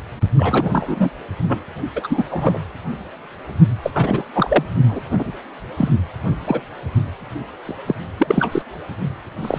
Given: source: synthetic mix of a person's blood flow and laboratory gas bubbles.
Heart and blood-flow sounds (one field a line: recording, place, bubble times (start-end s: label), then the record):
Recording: Doppler ultrasound of blood flow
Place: precordium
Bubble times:
0.37-1.10 s: bubbles
1.47-1.65 s: bubbles
1.95-2.23 s: bubbles
2.31-2.63 s: bubbles
3.83-3.90 s: bubbles
3.94-4.23 s: bubbles
4.34-4.64 s: bubbles
4.88-5.00 s: bubbles
5.12-5.31 s: bubbles
5.77-5.89 s: bubbles
6.46-6.62 s: bubbles
7.65-7.72 s: bubbles
7.86-7.95 s: bubbles
8.19-8.62 s: bubbles
9.42-9.59 s: bubbles
From the record:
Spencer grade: 3 (all of the cardiac periods contain showers or single bubble signals, but not dominating or overriding the cardiac motion signals)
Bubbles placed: anywhere in the cardiac cycle